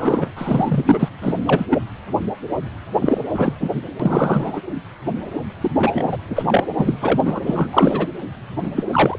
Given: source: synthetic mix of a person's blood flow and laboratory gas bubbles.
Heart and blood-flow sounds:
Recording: Doppler ultrasound of blood flow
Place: precordium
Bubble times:
0.00-0.29 s: bubbles
0.35-1.08 s: bubbles
1.21-1.33 s: bubbles
1.37-1.43 s: bubbles
1.47-1.66 s: bubbles
1.70-1.78 s: bubbles
3.01-3.21 s: bubbles
3.34-3.54 s: bubbles
3.60-3.69 s: bubbles
4.00-4.60 s: bubbles
5.61-5.71 s: bubbles
5.79-6.08 s: bubbles
6.12-6.17 s: bubbles
6.29-6.64 s: bubbles
6.78-6.97 s: bubbles
7.00-7.40 s: bubbles
7.46-7.69 s: bubbles
7.72-8.07 s: bubbles
8.62-8.69 s: bubbles
8.75-8.84 s: bubbles
8.92-9.19 s: bubbles
From the record:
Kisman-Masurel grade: 333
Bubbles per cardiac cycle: rolling drumbeat, 9 or more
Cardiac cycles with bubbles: 50 to 99%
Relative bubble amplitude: loud (0.450 to 0.775)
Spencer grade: 3 (all of the cardiac periods contain showers or single bubble signals, but not dominating or overriding the cardiac motion signals)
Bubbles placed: anywhere in the cardiac cycle

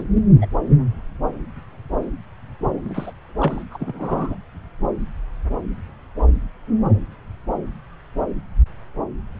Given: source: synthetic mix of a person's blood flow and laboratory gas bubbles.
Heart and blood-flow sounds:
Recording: Doppler ultrasound of blood flow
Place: subclavian vein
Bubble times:
0.00-0.03 s: bubbles
0.15-0.21 s: bubbles
0.41-0.47 s: bubbles
2.85-3.12 s: bubbles
3.39-3.64 s: bubbles
3.71-4.37 s: bubbles
From the record:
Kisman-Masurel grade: 222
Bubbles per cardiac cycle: several, 3 to 8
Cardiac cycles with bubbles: 10 to 50%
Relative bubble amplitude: moderate (0.250 to 0.450)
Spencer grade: 2 (many but less than half of the cardiac periods contain bubble signals, singularly or in groups)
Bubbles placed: anywhere in the cardiac cycle

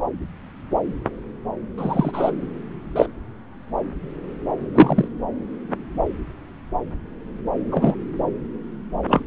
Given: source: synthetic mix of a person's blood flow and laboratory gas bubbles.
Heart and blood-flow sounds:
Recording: Doppler ultrasound of blood flow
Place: subclavian vein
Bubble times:
1.77-2.31 s: bubbles
2.96-3.06 s: bubbles
4.74-5.08 s: bubbles
7.71-7.94 s: bubbles
9.08-9.25 s: bubbles
From the record:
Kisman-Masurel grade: 123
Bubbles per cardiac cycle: 1 to 2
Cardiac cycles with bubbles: 10 to 50%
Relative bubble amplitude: loud (0.450 to 0.775)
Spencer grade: 2 (many but less than half of the cardiac periods contain bubble signals, singularly or in groups)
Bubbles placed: anywhere in the cardiac cycle

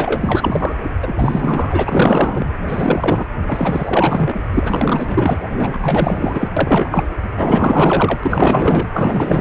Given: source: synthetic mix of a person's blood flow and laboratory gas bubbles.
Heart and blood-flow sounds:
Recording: Doppler ultrasound of blood flow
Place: precordium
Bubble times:
0.00-0.72 s: bubbles
1.02-2.48 s: bubbles
2.67-3.26 s: bubbles
3.47-4.40 s: bubbles
4.51-5.38 s: bubbles
5.56-5.77 s: bubbles
5.82-6.48 s: bubbles
6.56-6.88 s: bubbles
6.91-7.07 s: bubbles
7.36-8.17 s: bubbles
8.23-8.88 s: bubbles
8.93-9.41 s: bubbles
From the record:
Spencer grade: 4 (maximum detectable bubble signal sounding continuously throughout systole and diastole of every cardiac period, and overriding the amplitude of the normal cardiac signals)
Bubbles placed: anywhere in the cardiac cycle

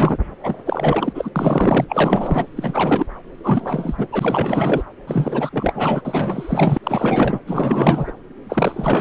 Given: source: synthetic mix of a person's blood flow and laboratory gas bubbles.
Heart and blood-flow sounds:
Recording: Doppler ultrasound of blood flow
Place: subclavian vein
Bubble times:
0.00-0.18 s: bubbles
0.43-0.55 s: bubbles
0.65-1.30 s: bubbles
1.35-1.85 s: bubbles
1.88-2.46 s: bubbles
2.56-3.06 s: bubbles
3.44-4.07 s: bubbles
4.12-4.83 s: bubbles
5.07-6.01 s: bubbles
6.04-6.78 s: bubbles
6.83-7.39 s: bubbles
7.46-8.12 s: bubbles
8.49-9.01 s: bubbles
From the record:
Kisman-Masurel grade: 444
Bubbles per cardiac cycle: continuous sound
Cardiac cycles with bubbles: 100%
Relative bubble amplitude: maximal (0.775 to 0.999)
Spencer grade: 4 (maximum detectable bubble signal sounding continuously throughout systole and diastole of every cardiac period, and overriding the amplitude of the normal cardiac signals)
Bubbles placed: anywhere in the cardiac cycle

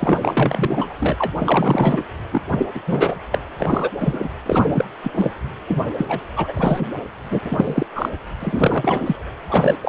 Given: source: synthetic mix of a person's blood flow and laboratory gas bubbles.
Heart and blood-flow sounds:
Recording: Doppler ultrasound of blood flow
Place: precordium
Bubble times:
0.00-0.18 s: bubbles
0.21-0.93 s: bubbles
1.00-1.16 s: bubbles
1.18-1.33 s: bubbles
1.37-2.02 s: bubbles
2.31-2.42 s: bubbles
2.51-2.67 s: bubbles
2.75-2.80 s: bubbles
2.86-3.14 s: bubbles
3.31-3.44 s: bubbles
3.58-3.90 s: bubbles
3.99-4.29 s: bubbles
4.46-4.85 s: bubbles
5.03-5.12 s: bubbles
5.16-5.30 s: bubbles
5.68-5.84 s: bubbles
5.97-6.05 s: bubbles
6.08-6.20 s: bubbles
6.36-6.85 s: bubbles
7.30-7.40 s: bubbles
7.45-7.86 s: bubbles
7.95-8.09 s: bubbles
8.40-9.16 s: bubbles
9.49-9.77 s: bubbles
9.83-9.89 s: bubbles
From the record:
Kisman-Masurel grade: 343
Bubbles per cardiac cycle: rolling drumbeat, 9 or more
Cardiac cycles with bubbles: 100%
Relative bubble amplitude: loud (0.450 to 0.775)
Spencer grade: 3 (all of the cardiac periods contain showers or single bubble signals, but not dominating or overriding the cardiac motion signals)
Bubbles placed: anywhere in the cardiac cycle

